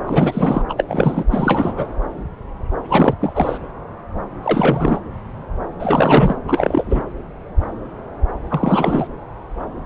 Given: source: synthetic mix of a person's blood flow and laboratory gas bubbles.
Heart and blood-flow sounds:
Doppler ultrasound of blood flow; subclavian vein
0.06-0.64 s: bubbles
0.69-0.74 s: bubbles
0.77-0.85 s: bubbles
0.88-1.24 s: bubbles
1.29-1.88 s: bubbles
2.88-3.15 s: bubbles
3.20-3.58 s: bubbles
4.42-5.00 s: bubbles
5.79-6.36 s: bubbles
6.47-7.01 s: bubbles
8.50-9.07 s: bubbles
From the record:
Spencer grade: 3 (all of the cardiac periods contain showers or single bubble signals, but not dominating or overriding the cardiac motion signals); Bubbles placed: anywhere in the cardiac cycle

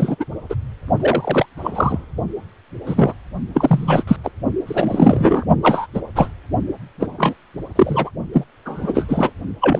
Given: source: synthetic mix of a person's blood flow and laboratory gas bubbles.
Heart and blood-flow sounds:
Doppler ultrasound of blood flow; precordium
0.00-0.16 s: bubbles
0.19-0.25 s: bubbles
0.49-0.55 s: bubbles
1.00-1.46 s: bubbles
1.57-2.05 s: bubbles
2.85-3.13 s: bubbles
3.54-4.04 s: bubbles
4.07-4.17 s: bubbles
4.23-4.30 s: bubbles
4.67-5.45 s: bubbles
5.62-5.87 s: bubbles
5.94-6.00 s: bubbles
6.16-6.30 s: bubbles
7.00-7.06 s: bubbles
7.17-7.33 s: bubbles
7.75-8.11 s: bubbles
8.32-8.44 s: bubbles
8.65-9.05 s: bubbles
9.08-9.30 s: bubbles
9.61-9.80 s: bubbles
From the record:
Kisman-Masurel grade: 243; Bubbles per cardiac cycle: several, 3 to 8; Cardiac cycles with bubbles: 100%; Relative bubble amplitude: loud (0.450 to 0.775); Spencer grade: 3 (all of the cardiac periods contain showers or single bubble signals, but not dominating or overriding the cardiac motion signals); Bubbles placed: only in the low amplitude regions of the cardiac cycle

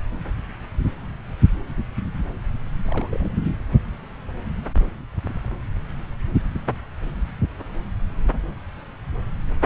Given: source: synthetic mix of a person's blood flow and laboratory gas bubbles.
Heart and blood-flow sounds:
Doppler ultrasound of blood flow; subclavian vein
2.85-3.32 s: bubbles
From the record:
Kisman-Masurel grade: 221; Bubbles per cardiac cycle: several, 3 to 8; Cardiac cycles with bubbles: 10 to 50%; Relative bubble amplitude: barely perceptible (0.100 to 0.250); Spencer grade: 2 (many but less than half of the cardiac periods contain bubble signals, singularly or in groups); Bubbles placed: anywhere in the cardiac cycle

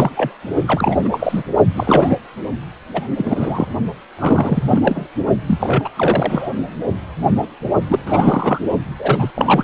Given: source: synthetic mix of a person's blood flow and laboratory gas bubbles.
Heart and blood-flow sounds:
Doppler ultrasound of blood flow; precordium
0.00-0.11 s: bubbles
0.17-0.32 s: bubbles
0.65-0.96 s: bubbles
1.02-1.43 s: bubbles
1.74-2.18 s: bubbles
2.94-3.02 s: bubbles
3.17-3.68 s: bubbles
4.18-5.07 s: bubbles
5.48-5.89 s: bubbles
5.96-6.52 s: bubbles
7.88-7.99 s: bubbles
8.05-8.59 s: bubbles
8.98-9.31 s: bubbles
9.34-9.64 s: bubbles
From the record:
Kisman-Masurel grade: 333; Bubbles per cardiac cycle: rolling drumbeat, 9 or more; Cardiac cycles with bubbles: 50 to 99%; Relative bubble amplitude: loud (0.450 to 0.775); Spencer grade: 3 (all of the cardiac periods contain showers or single bubble signals, but not dominating or overriding the cardiac motion signals); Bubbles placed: only in the low amplitude regions of the cardiac cycle

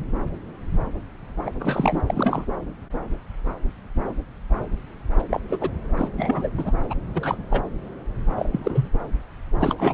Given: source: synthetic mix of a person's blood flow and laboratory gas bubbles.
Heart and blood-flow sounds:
Doppler ultrasound of blood flow; subclavian vein
1.44-1.52 s: bubbles
1.59-2.00 s: bubbles
2.06-2.44 s: bubbles
5.28-5.41 s: bubbles
5.48-5.57 s: bubbles
5.61-5.70 s: bubbles
5.97-6.09 s: bubbles
6.17-6.50 s: bubbles
6.57-6.72 s: bubbles
6.90-6.94 s: bubbles
7.14-7.36 s: bubbles
7.51-7.62 s: bubbles
8.37-8.89 s: bubbles
9.60-9.75 s: bubbles
9.78-9.94 s: bubbles
From the record:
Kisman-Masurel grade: 222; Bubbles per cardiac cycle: several, 3 to 8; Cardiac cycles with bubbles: 10 to 50%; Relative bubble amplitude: moderate (0.250 to 0.450); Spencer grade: 2 (many but less than half of the cardiac periods contain bubble signals, singularly or in groups); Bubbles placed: anywhere in the cardiac cycle

